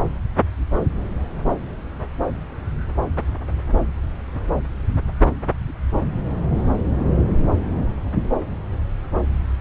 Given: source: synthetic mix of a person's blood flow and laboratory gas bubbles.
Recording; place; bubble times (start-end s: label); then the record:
Doppler ultrasound of blood flow; subclavian vein
no bubbles
From the record:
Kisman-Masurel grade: 000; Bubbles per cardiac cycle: 0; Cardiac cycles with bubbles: 0%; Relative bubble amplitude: no bubbles discernible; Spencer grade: 0 (complete lack of bubble signals)